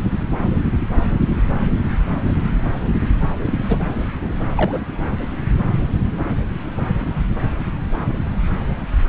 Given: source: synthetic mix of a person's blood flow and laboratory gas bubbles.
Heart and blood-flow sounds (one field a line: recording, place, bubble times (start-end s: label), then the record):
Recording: Doppler ultrasound of blood flow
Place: subclavian vein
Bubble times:
3.38-3.79 s: bubbles
4.45-4.80 s: bubbles
From the record:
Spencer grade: 2 (many but less than half of the cardiac periods contain bubble signals, singularly or in groups)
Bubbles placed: anywhere in the cardiac cycle